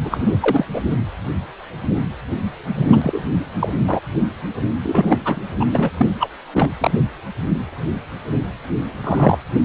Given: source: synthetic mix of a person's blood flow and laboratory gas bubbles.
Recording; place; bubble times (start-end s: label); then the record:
Doppler ultrasound of blood flow; precordium
0.03-0.65 s: bubbles
0.74-0.81 s: bubbles
2.75-3.24 s: bubbles
3.59-3.69 s: bubbles
3.87-3.99 s: bubbles
4.83-5.52 s: bubbles
5.60-5.66 s: bubbles
5.73-5.90 s: bubbles
5.99-6.07 s: bubbles
6.20-6.30 s: bubbles
6.53-6.71 s: bubbles
6.80-6.91 s: bubbles
9.03-9.38 s: bubbles
From the record:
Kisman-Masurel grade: 233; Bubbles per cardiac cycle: several, 3 to 8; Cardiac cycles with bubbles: 50 to 99%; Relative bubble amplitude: loud (0.450 to 0.775); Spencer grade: 3 (all of the cardiac periods contain showers or single bubble signals, but not dominating or overriding the cardiac motion signals); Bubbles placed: anywhere in the cardiac cycle